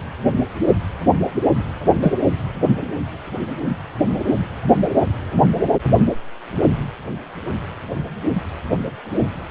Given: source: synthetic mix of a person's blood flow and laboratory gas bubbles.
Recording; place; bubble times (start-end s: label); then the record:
Doppler ultrasound of blood flow; precordium
2.02-2.17 s: bubbles
From the record:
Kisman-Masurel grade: 113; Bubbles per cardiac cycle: 1 to 2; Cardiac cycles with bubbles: 1 to 10%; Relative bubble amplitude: loud (0.450 to 0.775); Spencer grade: 1 (occasional bubble signal discernible with the cardiac motion signal, with majority of cardiac periods free of bubbles); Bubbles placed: anywhere in the cardiac cycle